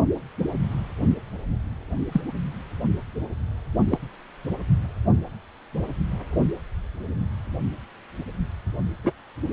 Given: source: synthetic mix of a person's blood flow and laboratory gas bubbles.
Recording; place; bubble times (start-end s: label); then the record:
Doppler ultrasound of blood flow; precordium
2.12-2.21 s: bubbles
3.89-3.98 s: bubbles
9.04-9.12 s: bubbles
From the record:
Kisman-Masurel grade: 122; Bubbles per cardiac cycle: 1 to 2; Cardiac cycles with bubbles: 10 to 50%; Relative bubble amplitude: moderate (0.250 to 0.450); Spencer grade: 2 (many but less than half of the cardiac periods contain bubble signals, singularly or in groups); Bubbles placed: only in the low amplitude regions of the cardiac cycle